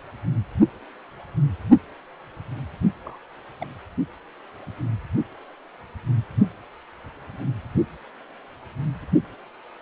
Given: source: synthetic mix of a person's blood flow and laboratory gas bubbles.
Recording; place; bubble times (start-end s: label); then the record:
Doppler ultrasound of blood flow; precordium
3.04-3.18 s: bubbles
3.60-3.67 s: bubbles
From the record:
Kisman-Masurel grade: 121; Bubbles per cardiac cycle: 1 to 2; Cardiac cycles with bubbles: 10 to 50%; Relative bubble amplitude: barely perceptible (0.100 to 0.250); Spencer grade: 2 (many but less than half of the cardiac periods contain bubble signals, singularly or in groups); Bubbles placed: only in the low amplitude regions of the cardiac cycle